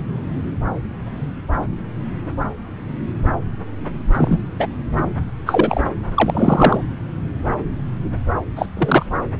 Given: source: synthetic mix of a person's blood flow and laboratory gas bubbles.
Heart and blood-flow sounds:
Doppler ultrasound of blood flow; subclavian vein
4.13-4.42 s: bubbles
4.59-4.68 s: bubbles
5.46-5.81 s: bubbles
6.16-6.82 s: bubbles
8.55-8.66 s: bubbles
8.77-9.05 s: bubbles
From the record:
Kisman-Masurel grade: 223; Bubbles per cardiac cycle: several, 3 to 8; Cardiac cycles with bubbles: 10 to 50%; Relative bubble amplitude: loud (0.450 to 0.775); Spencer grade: 2 (many but less than half of the cardiac periods contain bubble signals, singularly or in groups); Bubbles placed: anywhere in the cardiac cycle

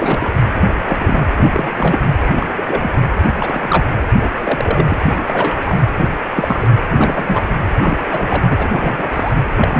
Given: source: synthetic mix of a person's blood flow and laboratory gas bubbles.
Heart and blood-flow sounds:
Doppler ultrasound of blood flow; precordium
0.00-0.32 s: bubbles
0.56-0.71 s: bubbles
0.88-1.22 s: bubbles
1.31-1.69 s: bubbles
1.76-1.99 s: bubbles
2.35-2.47 s: bubbles
2.57-2.91 s: bubbles
3.19-3.85 s: bubbles
4.17-4.29 s: bubbles
4.44-4.86 s: bubbles
4.89-4.95 s: bubbles
5.04-5.22 s: bubbles
5.27-5.76 s: bubbles
6.34-6.68 s: bubbles
6.96-7.42 s: bubbles
7.80-9.10 s: bubbles
9.13-9.35 s: bubbles
9.55-9.80 s: bubbles
From the record:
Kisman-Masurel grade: 242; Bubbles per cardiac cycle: several, 3 to 8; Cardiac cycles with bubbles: 100%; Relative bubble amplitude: moderate (0.250 to 0.450); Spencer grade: 3 (all of the cardiac periods contain showers or single bubble signals, but not dominating or overriding the cardiac motion signals); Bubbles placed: anywhere in the cardiac cycle

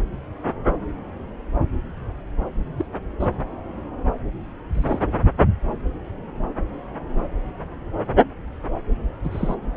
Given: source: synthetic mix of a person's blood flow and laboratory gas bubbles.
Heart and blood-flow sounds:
Doppler ultrasound of blood flow; subclavian vein
2.77-2.85 s: bubbles
3.20-3.27 s: bubbles
4.73-4.98 s: bubbles
9.24-9.54 s: bubbles
From the record:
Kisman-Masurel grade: 121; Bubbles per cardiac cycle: 1 to 2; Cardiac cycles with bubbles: 10 to 50%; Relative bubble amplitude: barely perceptible (0.100 to 0.250); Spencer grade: 2 (many but less than half of the cardiac periods contain bubble signals, singularly or in groups); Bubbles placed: anywhere in the cardiac cycle

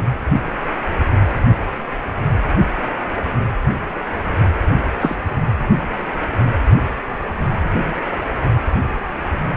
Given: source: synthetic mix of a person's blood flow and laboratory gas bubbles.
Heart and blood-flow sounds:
Doppler ultrasound of blood flow; precordium
5.00-5.16 s: bubbles
From the record:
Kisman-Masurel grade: 113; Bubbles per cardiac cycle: 1 to 2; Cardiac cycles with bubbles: 1 to 10%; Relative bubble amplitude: loud (0.450 to 0.775); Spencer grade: 1 (occasional bubble signal discernible with the cardiac motion signal, with majority of cardiac periods free of bubbles); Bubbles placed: anywhere in the cardiac cycle

